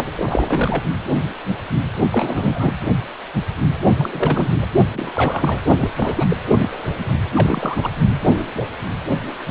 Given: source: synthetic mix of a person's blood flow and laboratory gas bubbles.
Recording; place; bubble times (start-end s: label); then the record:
Doppler ultrasound of blood flow; precordium
0.16-0.84 s: bubbles
2.11-2.73 s: bubbles
3.97-4.66 s: bubbles
4.94-5.10 s: bubbles
5.15-5.60 s: bubbles
5.81-5.90 s: bubbles
5.97-6.37 s: bubbles
6.50-6.79 s: bubbles
7.33-7.90 s: bubbles
From the record:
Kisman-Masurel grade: 332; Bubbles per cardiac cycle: rolling drumbeat, 9 or more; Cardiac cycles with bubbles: 50 to 99%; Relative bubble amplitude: moderate (0.250 to 0.450); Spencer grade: 3 (all of the cardiac periods contain showers or single bubble signals, but not dominating or overriding the cardiac motion signals); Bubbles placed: only in the low amplitude regions of the cardiac cycle